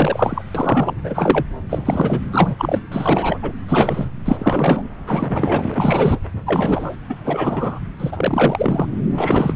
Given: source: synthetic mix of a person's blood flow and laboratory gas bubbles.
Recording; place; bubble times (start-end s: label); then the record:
Doppler ultrasound of blood flow; subclavian vein
0.00-0.42 s: bubbles
0.55-0.93 s: bubbles
1.03-1.46 s: bubbles
1.69-2.20 s: bubbles
2.31-2.55 s: bubbles
2.58-2.81 s: bubbles
2.92-3.39 s: bubbles
3.42-3.52 s: bubbles
3.68-4.09 s: bubbles
4.25-4.88 s: bubbles
5.07-6.20 s: bubbles
6.46-6.96 s: bubbles
7.09-7.16 s: bubbles
7.25-7.79 s: bubbles
8.00-8.87 s: bubbles
9.14-9.53 s: bubbles
From the record:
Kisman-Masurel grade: 343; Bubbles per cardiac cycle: rolling drumbeat, 9 or more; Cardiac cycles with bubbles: 100%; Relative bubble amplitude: loud (0.450 to 0.775); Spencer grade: 3 (all of the cardiac periods contain showers or single bubble signals, but not dominating or overriding the cardiac motion signals); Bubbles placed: anywhere in the cardiac cycle